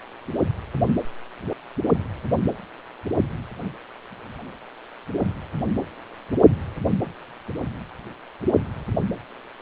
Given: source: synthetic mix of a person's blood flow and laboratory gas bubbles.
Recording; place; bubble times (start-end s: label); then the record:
Doppler ultrasound of blood flow; precordium
no bubbles
From the record:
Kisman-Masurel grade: 000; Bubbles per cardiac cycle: 0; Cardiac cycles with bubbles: 0%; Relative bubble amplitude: no bubbles discernible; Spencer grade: 0 (complete lack of bubble signals)